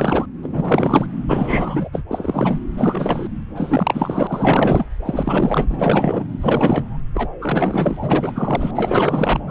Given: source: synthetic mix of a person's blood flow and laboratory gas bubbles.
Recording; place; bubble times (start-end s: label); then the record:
Doppler ultrasound of blood flow; subclavian vein
0.00-0.26 s: bubbles
0.42-1.06 s: bubbles
1.28-1.90 s: bubbles
1.92-2.02 s: bubbles
2.11-2.59 s: bubbles
2.77-3.28 s: bubbles
3.55-4.87 s: bubbles
5.05-6.28 s: bubbles
6.41-6.98 s: bubbles
7.14-7.29 s: bubbles
7.42-7.96 s: bubbles
8.01-8.71 s: bubbles
8.74-9.40 s: bubbles
9.47-9.51 s: bubbles
From the record:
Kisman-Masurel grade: 444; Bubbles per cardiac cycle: continuous sound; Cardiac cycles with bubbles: 100%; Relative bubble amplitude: maximal (0.775 to 0.999); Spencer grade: 4 (maximum detectable bubble signal sounding continuously throughout systole and diastole of every cardiac period, and overriding the amplitude of the normal cardiac signals); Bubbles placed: anywhere in the cardiac cycle